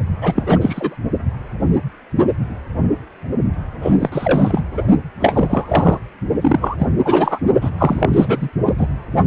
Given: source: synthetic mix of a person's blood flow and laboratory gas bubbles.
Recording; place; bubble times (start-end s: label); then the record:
Doppler ultrasound of blood flow; precordium
0.21-0.43 s: bubbles
0.46-0.97 s: bubbles
3.81-3.93 s: bubbles
3.99-4.09 s: bubbles
4.12-4.63 s: bubbles
4.71-4.83 s: bubbles
5.20-5.97 s: bubbles
6.41-6.75 s: bubbles
6.78-6.86 s: bubbles
7.05-7.39 s: bubbles
7.61-7.70 s: bubbles
7.77-8.49 s: bubbles
8.66-8.74 s: bubbles
8.78-8.88 s: bubbles
From the record:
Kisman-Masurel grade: 333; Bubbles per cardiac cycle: rolling drumbeat, 9 or more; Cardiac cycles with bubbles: 50 to 99%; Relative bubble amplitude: loud (0.450 to 0.775); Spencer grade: 3 (all of the cardiac periods contain showers or single bubble signals, but not dominating or overriding the cardiac motion signals); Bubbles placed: only in the low amplitude regions of the cardiac cycle